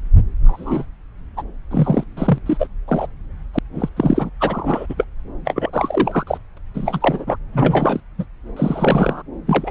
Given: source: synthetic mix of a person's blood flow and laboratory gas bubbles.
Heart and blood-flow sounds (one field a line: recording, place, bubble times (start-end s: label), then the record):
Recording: Doppler ultrasound of blood flow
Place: subclavian vein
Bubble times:
0.44-0.85 s: bubbles
1.36-1.43 s: bubbles
1.71-2.04 s: bubbles
2.17-2.38 s: bubbles
2.46-2.67 s: bubbles
2.88-3.07 s: bubbles
3.54-3.59 s: bubbles
3.74-3.89 s: bubbles
3.96-4.30 s: bubbles
4.40-4.86 s: bubbles
4.89-4.95 s: bubbles
4.97-5.04 s: bubbles
5.45-5.70 s: bubbles
5.73-6.24 s: bubbles
6.27-6.38 s: bubbles
6.57-6.58 s: bubbles
6.75-7.37 s: bubbles
7.53-8.00 s: bubbles
8.18-8.26 s: bubbles
8.56-9.22 s: bubbles
9.46-9.71 s: bubbles
From the record:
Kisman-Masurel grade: 243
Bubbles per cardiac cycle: several, 3 to 8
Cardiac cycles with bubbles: 100%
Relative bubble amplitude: loud (0.450 to 0.775)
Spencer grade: 3 (all of the cardiac periods contain showers or single bubble signals, but not dominating or overriding the cardiac motion signals)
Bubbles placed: anywhere in the cardiac cycle